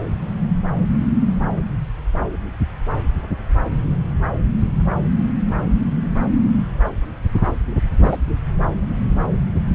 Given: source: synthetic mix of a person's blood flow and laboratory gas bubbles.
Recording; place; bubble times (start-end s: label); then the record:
Doppler ultrasound of blood flow; subclavian vein
8.03-8.17 s: bubbles
From the record:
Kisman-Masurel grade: 122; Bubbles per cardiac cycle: 1 to 2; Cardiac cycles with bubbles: 10 to 50%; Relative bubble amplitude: moderate (0.250 to 0.450); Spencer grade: 2 (many but less than half of the cardiac periods contain bubble signals, singularly or in groups); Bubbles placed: anywhere in the cardiac cycle